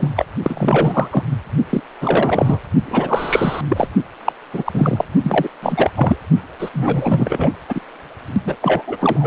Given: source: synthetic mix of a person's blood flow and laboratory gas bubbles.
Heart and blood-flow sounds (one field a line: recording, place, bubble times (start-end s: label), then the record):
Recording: Doppler ultrasound of blood flow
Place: precordium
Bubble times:
0.00-0.08 s: bubbles
0.15-0.25 s: bubbles
0.43-1.24 s: bubbles
1.70-1.81 s: bubbles
2.01-2.59 s: bubbles
2.85-3.61 s: bubbles
3.68-3.88 s: bubbles
4.25-4.33 s: bubbles
4.54-4.63 s: bubbles
4.66-5.04 s: bubbles
5.24-5.49 s: bubbles
5.62-5.91 s: bubbles
5.95-6.17 s: bubbles
6.59-6.70 s: bubbles
6.73-7.50 s: bubbles
7.68-7.81 s: bubbles
8.45-8.56 s: bubbles
8.62-8.83 s: bubbles
8.87-8.97 s: bubbles
9.00-9.27 s: bubbles
From the record:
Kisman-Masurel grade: 333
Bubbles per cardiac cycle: rolling drumbeat, 9 or more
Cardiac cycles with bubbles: 50 to 99%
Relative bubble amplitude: loud (0.450 to 0.775)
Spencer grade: 3 (all of the cardiac periods contain showers or single bubble signals, but not dominating or overriding the cardiac motion signals)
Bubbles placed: only in the low amplitude regions of the cardiac cycle